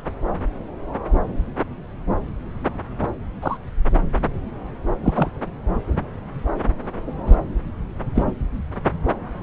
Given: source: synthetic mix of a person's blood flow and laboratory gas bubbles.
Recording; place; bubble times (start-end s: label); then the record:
Doppler ultrasound of blood flow; subclavian vein
3.42-3.57 s: bubbles
5.04-5.30 s: bubbles
7.26-7.35 s: bubbles
8.15-8.24 s: bubbles
8.26-8.33 s: bubbles
From the record:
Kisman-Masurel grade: 123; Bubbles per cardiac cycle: 1 to 2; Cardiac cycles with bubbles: 10 to 50%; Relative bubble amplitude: loud (0.450 to 0.775); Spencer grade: 2 (many but less than half of the cardiac periods contain bubble signals, singularly or in groups); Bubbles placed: anywhere in the cardiac cycle